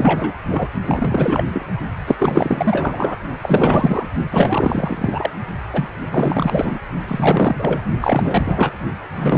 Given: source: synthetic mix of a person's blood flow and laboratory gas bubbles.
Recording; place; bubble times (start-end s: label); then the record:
Doppler ultrasound of blood flow; precordium
0.00-0.32 s: bubbles
0.49-0.69 s: bubbles
0.81-1.44 s: bubbles
1.52-1.66 s: bubbles
2.06-2.16 s: bubbles
2.19-3.17 s: bubbles
3.42-4.07 s: bubbles
4.31-5.30 s: bubbles
5.73-5.88 s: bubbles
6.11-6.78 s: bubbles
7.07-7.81 s: bubbles
8.00-8.72 s: bubbles
9.14-9.38 s: bubbles
From the record:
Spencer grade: 4 (maximum detectable bubble signal sounding continuously throughout systole and diastole of every cardiac period, and overriding the amplitude of the normal cardiac signals); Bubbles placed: only in the low amplitude regions of the cardiac cycle